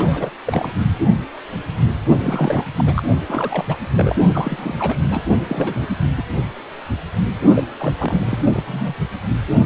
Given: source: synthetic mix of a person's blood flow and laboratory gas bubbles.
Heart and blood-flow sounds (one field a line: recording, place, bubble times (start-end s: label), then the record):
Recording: Doppler ultrasound of blood flow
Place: precordium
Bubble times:
0.00-0.35 s: bubbles
0.47-0.72 s: bubbles
2.20-2.67 s: bubbles
2.75-3.04 s: bubbles
3.28-3.65 s: bubbles
3.68-3.77 s: bubbles
3.96-4.13 s: bubbles
4.33-4.75 s: bubbles
4.79-5.24 s: bubbles
5.37-5.88 s: bubbles
6.17-6.24 s: bubbles
7.54-7.63 s: bubbles
7.79-7.92 s: bubbles
8.00-8.62 s: bubbles
8.67-8.95 s: bubbles
From the record:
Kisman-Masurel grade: 332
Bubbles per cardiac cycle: rolling drumbeat, 9 or more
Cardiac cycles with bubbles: 50 to 99%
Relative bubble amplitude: moderate (0.250 to 0.450)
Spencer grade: 3 (all of the cardiac periods contain showers or single bubble signals, but not dominating or overriding the cardiac motion signals)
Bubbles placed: only in the low amplitude regions of the cardiac cycle